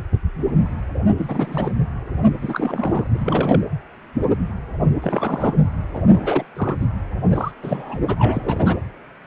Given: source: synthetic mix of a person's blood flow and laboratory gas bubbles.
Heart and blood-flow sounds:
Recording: Doppler ultrasound of blood flow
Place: precordium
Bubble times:
1.17-1.73 s: bubbles
2.42-3.07 s: bubbles
3.10-3.61 s: bubbles
5.01-5.54 s: bubbles
5.94-6.01 s: bubbles
6.08-6.46 s: bubbles
6.57-6.76 s: bubbles
6.79-6.86 s: bubbles
7.25-7.51 s: bubbles
7.62-8.04 s: bubbles
8.07-8.77 s: bubbles
From the record:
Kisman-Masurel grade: 332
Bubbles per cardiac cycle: rolling drumbeat, 9 or more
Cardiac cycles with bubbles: 50 to 99%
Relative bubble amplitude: moderate (0.250 to 0.450)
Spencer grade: 3 (all of the cardiac periods contain showers or single bubble signals, but not dominating or overriding the cardiac motion signals)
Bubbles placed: anywhere in the cardiac cycle

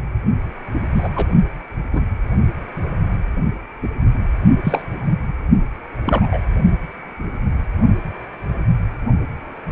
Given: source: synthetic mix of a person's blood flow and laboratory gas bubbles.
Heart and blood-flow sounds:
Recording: Doppler ultrasound of blood flow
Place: precordium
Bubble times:
0.94-1.08 s: bubbles
1.16-1.26 s: bubbles
1.92-2.04 s: bubbles
3.82-3.89 s: bubbles
4.64-4.83 s: bubbles
6.05-6.40 s: bubbles
From the record:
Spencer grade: 2 (many but less than half of the cardiac periods contain bubble signals, singularly or in groups)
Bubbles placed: only in the low amplitude regions of the cardiac cycle

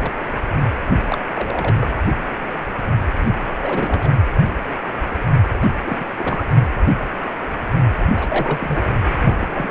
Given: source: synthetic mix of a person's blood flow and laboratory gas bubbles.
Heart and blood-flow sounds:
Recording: Doppler ultrasound of blood flow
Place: precordium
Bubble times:
0.01-0.12 s: bubbles
0.28-0.32 s: bubbles
0.50-0.55 s: bubbles
1.06-1.18 s: bubbles
1.34-1.95 s: bubbles
3.21-3.30 s: bubbles
3.62-4.11 s: bubbles
5.60-5.68 s: bubbles
5.85-6.05 s: bubbles
6.17-6.43 s: bubbles
8.14-8.82 s: bubbles
9.06-9.12 s: bubbles
9.22-9.70 s: bubbles
From the record:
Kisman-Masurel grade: 232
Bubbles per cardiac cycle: several, 3 to 8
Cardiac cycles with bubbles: 50 to 99%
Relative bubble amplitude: moderate (0.250 to 0.450)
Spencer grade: 3 (all of the cardiac periods contain showers or single bubble signals, but not dominating or overriding the cardiac motion signals)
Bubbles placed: anywhere in the cardiac cycle

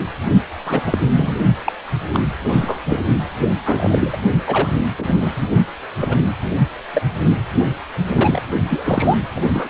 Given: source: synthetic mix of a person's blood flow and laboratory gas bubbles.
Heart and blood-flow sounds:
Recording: Doppler ultrasound of blood flow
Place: precordium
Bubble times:
0.66-0.98 s: bubbles
1.15-1.36 s: bubbles
1.66-1.73 s: bubbles
2.13-2.19 s: bubbles
2.51-2.80 s: bubbles
2.86-3.00 s: bubbles
3.40-3.48 s: bubbles
3.65-4.19 s: bubbles
4.47-4.69 s: bubbles
4.98-5.47 s: bubbles
6.01-6.16 s: bubbles
6.94-7.02 s: bubbles
8.11-8.42 s: bubbles
8.68-9.18 s: bubbles
9.36-9.51 s: bubbles
9.53-9.70 s: bubbles
From the record:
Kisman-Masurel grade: 242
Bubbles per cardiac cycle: several, 3 to 8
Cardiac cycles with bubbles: 100%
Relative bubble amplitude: moderate (0.250 to 0.450)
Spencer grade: 3 (all of the cardiac periods contain showers or single bubble signals, but not dominating or overriding the cardiac motion signals)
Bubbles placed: only in the low amplitude regions of the cardiac cycle

